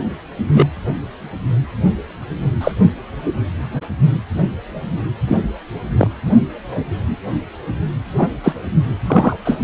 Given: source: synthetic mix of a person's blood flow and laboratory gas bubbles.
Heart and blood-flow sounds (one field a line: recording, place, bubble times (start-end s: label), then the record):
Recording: Doppler ultrasound of blood flow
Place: precordium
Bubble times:
0.53-0.66 s: bubbles
2.60-2.72 s: bubbles
5.28-5.40 s: bubbles
5.98-6.08 s: bubbles
6.25-6.35 s: bubbles
8.17-8.34 s: bubbles
8.43-8.54 s: bubbles
9.06-9.36 s: bubbles
9.44-9.58 s: bubbles
From the record:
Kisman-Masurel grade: 123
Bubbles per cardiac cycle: 1 to 2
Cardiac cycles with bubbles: 10 to 50%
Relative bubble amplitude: loud (0.450 to 0.775)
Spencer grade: 2 (many but less than half of the cardiac periods contain bubble signals, singularly or in groups)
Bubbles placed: anywhere in the cardiac cycle